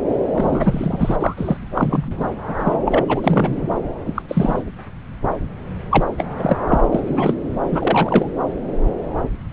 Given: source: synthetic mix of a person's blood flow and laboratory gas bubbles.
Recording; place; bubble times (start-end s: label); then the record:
Doppler ultrasound of blood flow; subclavian vein
0.33-1.16 s: bubbles
1.19-1.57 s: bubbles
1.74-2.42 s: bubbles
2.48-2.79 s: bubbles
2.85-3.65 s: bubbles
4.05-4.22 s: bubbles
4.28-4.64 s: bubbles
5.90-6.03 s: bubbles
6.17-6.57 s: bubbles
6.67-6.81 s: bubbles
6.92-7.34 s: bubbles
7.59-8.28 s: bubbles
From the record:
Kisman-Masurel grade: 233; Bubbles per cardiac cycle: several, 3 to 8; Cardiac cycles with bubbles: 50 to 99%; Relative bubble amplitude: loud (0.450 to 0.775); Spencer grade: 3 (all of the cardiac periods contain showers or single bubble signals, but not dominating or overriding the cardiac motion signals); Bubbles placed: anywhere in the cardiac cycle